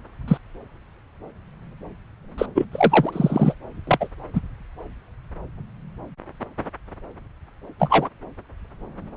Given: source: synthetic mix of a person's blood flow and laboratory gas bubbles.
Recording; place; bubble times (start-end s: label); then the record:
Doppler ultrasound of blood flow; subclavian vein
0.28-0.38 s: bubbles
2.38-2.46 s: bubbles
2.55-2.65 s: bubbles
2.71-3.54 s: bubbles
3.87-4.08 s: bubbles
4.34-4.40 s: bubbles
7.79-8.09 s: bubbles
From the record:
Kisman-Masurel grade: 123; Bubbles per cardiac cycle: 1 to 2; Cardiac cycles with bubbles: 10 to 50%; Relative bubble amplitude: loud (0.450 to 0.775); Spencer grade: 2 (many but less than half of the cardiac periods contain bubble signals, singularly or in groups); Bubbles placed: anywhere in the cardiac cycle